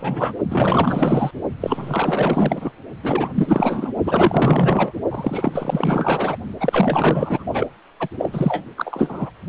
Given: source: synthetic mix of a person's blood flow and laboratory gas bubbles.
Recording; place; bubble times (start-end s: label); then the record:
Doppler ultrasound of blood flow; precordium
0.00-0.33 s: bubbles
0.50-1.31 s: bubbles
1.61-2.72 s: bubbles
3.03-3.91 s: bubbles
4.04-4.92 s: bubbles
5.11-6.36 s: bubbles
6.60-7.43 s: bubbles
7.53-7.67 s: bubbles
8.00-8.08 s: bubbles
8.18-8.65 s: bubbles
8.77-9.30 s: bubbles
From the record:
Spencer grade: 4 (maximum detectable bubble signal sounding continuously throughout systole and diastole of every cardiac period, and overriding the amplitude of the normal cardiac signals); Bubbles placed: only in the low amplitude regions of the cardiac cycle